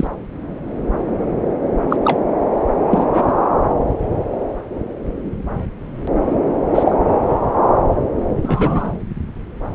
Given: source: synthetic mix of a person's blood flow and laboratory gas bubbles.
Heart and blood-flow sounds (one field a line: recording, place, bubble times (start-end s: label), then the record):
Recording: Doppler ultrasound of blood flow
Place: subclavian vein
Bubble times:
0.00-0.07 s: bubbles
1.90-1.96 s: bubbles
2.04-2.21 s: bubbles
2.90-3.32 s: bubbles
6.75-6.97 s: bubbles
8.42-8.94 s: bubbles
From the record:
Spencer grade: 2 (many but less than half of the cardiac periods contain bubble signals, singularly or in groups)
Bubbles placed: anywhere in the cardiac cycle